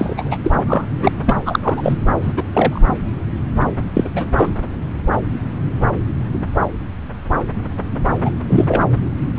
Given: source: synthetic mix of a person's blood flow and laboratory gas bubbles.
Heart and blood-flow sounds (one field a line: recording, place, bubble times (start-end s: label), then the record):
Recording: Doppler ultrasound of blood flow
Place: subclavian vein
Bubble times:
0.00-0.14 s: bubbles
0.17-0.37 s: bubbles
0.44-0.51 s: bubbles
0.67-0.88 s: bubbles
0.95-1.11 s: bubbles
1.26-1.36 s: bubbles
1.45-1.59 s: bubbles
1.62-1.99 s: bubbles
2.22-2.33 s: bubbles
2.37-2.43 s: bubbles
2.54-2.81 s: bubbles
3.94-4.09 s: bubbles
4.14-4.31 s: bubbles
4.35-4.55 s: bubbles
8.24-8.32 s: bubbles
8.50-8.83 s: bubbles
From the record:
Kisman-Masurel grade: 223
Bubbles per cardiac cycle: several, 3 to 8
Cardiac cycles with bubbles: 10 to 50%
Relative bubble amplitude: loud (0.450 to 0.775)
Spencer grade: 2 (many but less than half of the cardiac periods contain bubble signals, singularly or in groups)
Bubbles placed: anywhere in the cardiac cycle